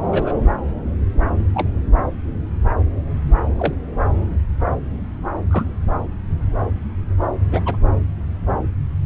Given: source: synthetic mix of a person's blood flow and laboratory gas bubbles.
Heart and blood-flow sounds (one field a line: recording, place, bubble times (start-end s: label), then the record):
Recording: Doppler ultrasound of blood flow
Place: subclavian vein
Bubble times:
0.11-0.33 s: bubbles
1.54-1.68 s: bubbles
3.58-3.73 s: bubbles
5.50-5.64 s: bubbles
7.50-7.61 s: bubbles
7.66-7.77 s: bubbles
From the record:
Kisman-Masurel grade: 122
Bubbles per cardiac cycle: 1 to 2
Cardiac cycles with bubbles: 10 to 50%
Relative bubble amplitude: moderate (0.250 to 0.450)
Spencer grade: 2 (many but less than half of the cardiac periods contain bubble signals, singularly or in groups)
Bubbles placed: anywhere in the cardiac cycle